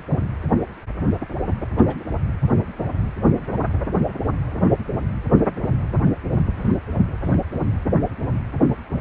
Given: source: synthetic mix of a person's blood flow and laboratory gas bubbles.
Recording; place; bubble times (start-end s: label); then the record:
Doppler ultrasound of blood flow; precordium
1.76-1.95 s: bubbles
2.27-2.31 s: bubbles
6.01-6.09 s: bubbles
6.53-6.77 s: bubbles
7.23-7.38 s: bubbles
From the record:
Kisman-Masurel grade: 121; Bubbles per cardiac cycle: 1 to 2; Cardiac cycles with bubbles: 10 to 50%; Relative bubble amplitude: barely perceptible (0.100 to 0.250); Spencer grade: 2 (many but less than half of the cardiac periods contain bubble signals, singularly or in groups); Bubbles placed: anywhere in the cardiac cycle